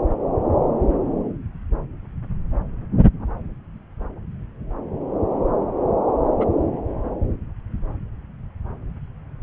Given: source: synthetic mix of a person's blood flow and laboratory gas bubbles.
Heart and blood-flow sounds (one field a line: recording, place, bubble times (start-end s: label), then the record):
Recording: Doppler ultrasound of blood flow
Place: subclavian vein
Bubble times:
6.39-6.46 s: bubbles
From the record:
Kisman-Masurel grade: 113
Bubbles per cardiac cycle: 1 to 2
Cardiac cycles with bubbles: 1 to 10%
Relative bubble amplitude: loud (0.450 to 0.775)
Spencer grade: 1 (occasional bubble signal discernible with the cardiac motion signal, with majority of cardiac periods free of bubbles)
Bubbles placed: anywhere in the cardiac cycle